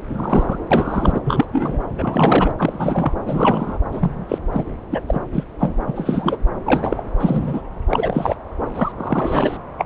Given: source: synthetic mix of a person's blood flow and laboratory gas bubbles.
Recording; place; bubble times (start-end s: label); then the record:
Doppler ultrasound of blood flow; subclavian vein
0.08-0.58 s: bubbles
0.70-1.20 s: bubbles
1.25-1.46 s: bubbles
1.52-1.84 s: bubbles
1.98-2.54 s: bubbles
2.58-3.14 s: bubbles
3.25-3.79 s: bubbles
3.92-4.38 s: bubbles
4.53-4.63 s: bubbles
4.91-5.00 s: bubbles
5.08-5.20 s: bubbles
5.33-5.43 s: bubbles
5.59-5.74 s: bubbles
5.86-6.37 s: bubbles
6.66-7.03 s: bubbles
7.20-7.62 s: bubbles
7.89-8.36 s: bubbles
8.75-8.92 s: bubbles
8.98-9.57 s: bubbles
9.78-9.86 s: bubbles
From the record:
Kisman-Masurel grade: 243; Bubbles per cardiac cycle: several, 3 to 8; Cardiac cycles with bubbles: 100%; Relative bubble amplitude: loud (0.450 to 0.775); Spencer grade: 3 (all of the cardiac periods contain showers or single bubble signals, but not dominating or overriding the cardiac motion signals); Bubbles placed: anywhere in the cardiac cycle